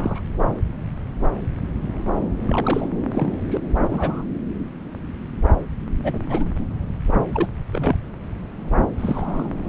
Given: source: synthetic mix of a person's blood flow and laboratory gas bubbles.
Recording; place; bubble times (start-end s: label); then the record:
Doppler ultrasound of blood flow; subclavian vein
0.00-0.21 s: bubbles
2.44-2.86 s: bubbles
3.12-3.42 s: bubbles
3.50-3.60 s: bubbles
3.90-4.26 s: bubbles
6.04-6.18 s: bubbles
6.29-6.46 s: bubbles
7.33-7.48 s: bubbles
7.72-7.96 s: bubbles
8.97-9.48 s: bubbles
From the record:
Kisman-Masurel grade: 232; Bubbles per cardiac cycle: several, 3 to 8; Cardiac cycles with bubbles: 50 to 99%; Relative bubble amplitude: moderate (0.250 to 0.450); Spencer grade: 3 (all of the cardiac periods contain showers or single bubble signals, but not dominating or overriding the cardiac motion signals); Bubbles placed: anywhere in the cardiac cycle